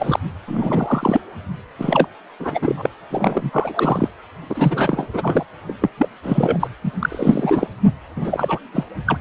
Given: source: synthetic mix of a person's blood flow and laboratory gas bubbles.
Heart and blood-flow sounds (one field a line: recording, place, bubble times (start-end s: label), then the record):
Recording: Doppler ultrasound of blood flow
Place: precordium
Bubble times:
0.00-0.20 s: bubbles
0.47-1.21 s: bubbles
1.78-2.08 s: bubbles
2.40-2.90 s: bubbles
3.10-4.08 s: bubbles
4.49-5.08 s: bubbles
5.13-5.45 s: bubbles
5.67-5.73 s: bubbles
5.81-5.90 s: bubbles
5.98-6.08 s: bubbles
6.23-6.67 s: bubbles
6.83-6.91 s: bubbles
6.99-7.67 s: bubbles
8.15-8.59 s: bubbles
8.73-8.84 s: bubbles
9.06-9.17 s: bubbles
From the record:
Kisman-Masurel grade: 343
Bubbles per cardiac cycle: rolling drumbeat, 9 or more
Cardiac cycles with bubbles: 100%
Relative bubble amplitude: loud (0.450 to 0.775)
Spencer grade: 3 (all of the cardiac periods contain showers or single bubble signals, but not dominating or overriding the cardiac motion signals)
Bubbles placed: anywhere in the cardiac cycle